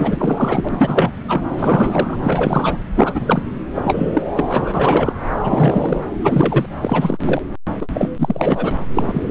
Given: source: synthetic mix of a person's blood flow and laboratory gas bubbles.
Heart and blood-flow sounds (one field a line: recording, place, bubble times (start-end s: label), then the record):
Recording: Doppler ultrasound of blood flow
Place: subclavian vein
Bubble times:
0.00-0.69 s: bubbles
0.72-1.42 s: bubbles
1.52-2.17 s: bubbles
2.22-2.83 s: bubbles
2.96-3.42 s: bubbles
3.75-4.23 s: bubbles
4.36-5.13 s: bubbles
5.44-6.03 s: bubbles
6.23-6.66 s: bubbles
6.82-7.42 s: bubbles
7.81-7.87 s: bubbles
7.93-8.10 s: bubbles
8.18-8.72 s: bubbles
8.94-9.22 s: bubbles
9.29-9.31 s: bubbles
From the record:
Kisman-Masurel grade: 343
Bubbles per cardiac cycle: rolling drumbeat, 9 or more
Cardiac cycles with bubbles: 100%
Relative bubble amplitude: loud (0.450 to 0.775)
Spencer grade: 3 (all of the cardiac periods contain showers or single bubble signals, but not dominating or overriding the cardiac motion signals)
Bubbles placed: anywhere in the cardiac cycle